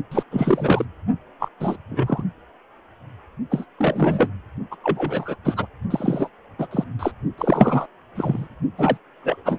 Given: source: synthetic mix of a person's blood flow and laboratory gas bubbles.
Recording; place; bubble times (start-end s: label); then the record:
Doppler ultrasound of blood flow; precordium
0.11-0.23 s: bubbles
0.31-0.85 s: bubbles
1.39-1.49 s: bubbles
1.59-1.77 s: bubbles
1.91-2.22 s: bubbles
3.50-3.66 s: bubbles
3.78-4.31 s: bubbles
4.71-4.76 s: bubbles
4.83-5.36 s: bubbles
5.44-5.67 s: bubbles
5.90-6.29 s: bubbles
6.58-6.67 s: bubbles
6.71-6.84 s: bubbles
6.99-7.12 s: bubbles
7.38-7.88 s: bubbles
8.15-8.48 s: bubbles
8.78-8.97 s: bubbles
9.21-9.42 s: bubbles
9.45-9.59 s: bubbles
From the record:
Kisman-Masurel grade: 233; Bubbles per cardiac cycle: several, 3 to 8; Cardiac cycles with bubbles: 50 to 99%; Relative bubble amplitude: loud (0.450 to 0.775); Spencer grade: 3 (all of the cardiac periods contain showers or single bubble signals, but not dominating or overriding the cardiac motion signals); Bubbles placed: only in the low amplitude regions of the cardiac cycle